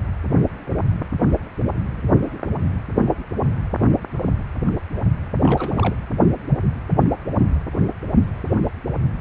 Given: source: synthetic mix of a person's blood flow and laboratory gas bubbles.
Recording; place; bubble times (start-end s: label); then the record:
Doppler ultrasound of blood flow; precordium
5.40-5.95 s: bubbles
From the record:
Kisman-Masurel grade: 211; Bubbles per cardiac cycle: several, 3 to 8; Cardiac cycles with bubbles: 1 to 10%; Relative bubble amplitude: barely perceptible (0.100 to 0.250); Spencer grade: 1 (occasional bubble signal discernible with the cardiac motion signal, with majority of cardiac periods free of bubbles); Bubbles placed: anywhere in the cardiac cycle